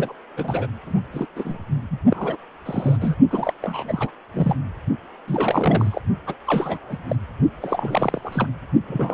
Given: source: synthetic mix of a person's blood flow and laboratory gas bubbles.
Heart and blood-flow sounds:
Doppler ultrasound of blood flow; precordium
0.00-0.13 s: bubbles
0.37-0.67 s: bubbles
0.85-1.01 s: bubbles
1.13-1.26 s: bubbles
1.35-1.58 s: bubbles
1.91-1.98 s: bubbles
2.06-2.37 s: bubbles
2.66-2.97 s: bubbles
3.00-3.15 s: bubbles
3.31-3.53 s: bubbles
3.62-4.11 s: bubbles
4.33-4.56 s: bubbles
5.27-6.00 s: bubbles
6.27-6.34 s: bubbles
6.46-6.97 s: bubbles
7.07-7.16 s: bubbles
7.61-8.47 s: bubbles
8.88-9.14 s: bubbles
From the record:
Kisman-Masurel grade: 342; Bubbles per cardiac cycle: rolling drumbeat, 9 or more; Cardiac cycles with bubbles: 100%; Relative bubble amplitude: moderate (0.250 to 0.450); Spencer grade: 3 (all of the cardiac periods contain showers or single bubble signals, but not dominating or overriding the cardiac motion signals); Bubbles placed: only in the low amplitude regions of the cardiac cycle

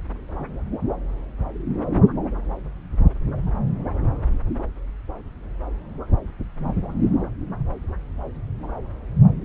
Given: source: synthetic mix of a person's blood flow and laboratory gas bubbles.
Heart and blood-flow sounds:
Doppler ultrasound of blood flow; subclavian vein
no bubbles
From the record:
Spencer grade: 0 (complete lack of bubble signals)

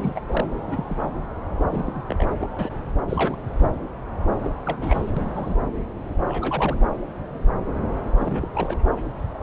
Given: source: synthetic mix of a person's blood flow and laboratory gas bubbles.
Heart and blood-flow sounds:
Doppler ultrasound of blood flow; subclavian vein
0.00-0.20 s: bubbles
0.28-0.50 s: bubbles
0.67-0.99 s: bubbles
1.03-1.09 s: bubbles
1.70-2.02 s: bubbles
2.08-2.26 s: bubbles
2.40-2.48 s: bubbles
2.58-2.70 s: bubbles
3.06-3.42 s: bubbles
4.43-4.50 s: bubbles
4.66-5.12 s: bubbles
5.17-5.55 s: bubbles
6.26-6.76 s: bubbles
8.20-8.48 s: bubbles
8.54-8.78 s: bubbles
From the record:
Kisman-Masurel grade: 232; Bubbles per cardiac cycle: several, 3 to 8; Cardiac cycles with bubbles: 50 to 99%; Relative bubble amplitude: moderate (0.250 to 0.450); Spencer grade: 3 (all of the cardiac periods contain showers or single bubble signals, but not dominating or overriding the cardiac motion signals); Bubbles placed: anywhere in the cardiac cycle

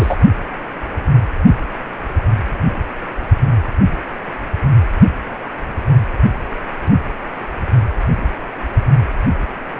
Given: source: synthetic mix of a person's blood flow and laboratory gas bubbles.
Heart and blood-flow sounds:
Doppler ultrasound of blood flow; precordium
0.00-0.17 s: bubbles
From the record:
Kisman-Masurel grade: 213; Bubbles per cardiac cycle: several, 3 to 8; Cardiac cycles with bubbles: 1 to 10%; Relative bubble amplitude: loud (0.450 to 0.775); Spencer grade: 1 (occasional bubble signal discernible with the cardiac motion signal, with majority of cardiac periods free of bubbles); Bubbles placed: only in the low amplitude regions of the cardiac cycle

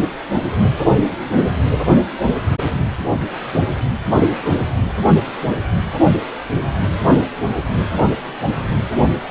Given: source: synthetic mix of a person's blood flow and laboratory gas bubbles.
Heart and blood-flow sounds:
Doppler ultrasound of blood flow; precordium
no bubbles
From the record:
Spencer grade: 0 (complete lack of bubble signals)

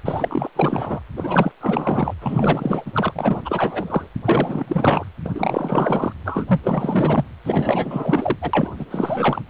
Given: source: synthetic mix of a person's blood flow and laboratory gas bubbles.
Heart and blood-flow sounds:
Doppler ultrasound of blood flow; precordium
0.04-0.51 s: bubbles
0.55-1.00 s: bubbles
1.17-1.52 s: bubbles
1.60-2.15 s: bubbles
2.21-3.12 s: bubbles
3.15-3.41 s: bubbles
3.44-4.09 s: bubbles
4.25-5.04 s: bubbles
5.24-5.31 s: bubbles
5.35-6.13 s: bubbles
6.25-6.60 s: bubbles
6.63-7.25 s: bubbles
7.44-8.37 s: bubbles
8.41-8.71 s: bubbles
8.79-8.86 s: bubbles
8.90-9.41 s: bubbles
From the record:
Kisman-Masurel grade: 444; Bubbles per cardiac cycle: continuous sound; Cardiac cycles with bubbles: 100%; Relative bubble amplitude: maximal (0.775 to 0.999); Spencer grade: 4 (maximum detectable bubble signal sounding continuously throughout systole and diastole of every cardiac period, and overriding the amplitude of the normal cardiac signals); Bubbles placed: anywhere in the cardiac cycle

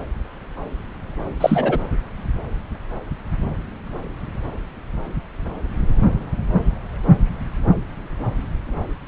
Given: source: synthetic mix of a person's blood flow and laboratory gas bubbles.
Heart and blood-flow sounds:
Doppler ultrasound of blood flow; subclavian vein
1.41-1.78 s: bubbles
From the record:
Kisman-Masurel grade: 113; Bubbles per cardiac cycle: 1 to 2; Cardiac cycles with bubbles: 1 to 10%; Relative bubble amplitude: loud (0.450 to 0.775); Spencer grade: 1 (occasional bubble signal discernible with the cardiac motion signal, with majority of cardiac periods free of bubbles); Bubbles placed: anywhere in the cardiac cycle

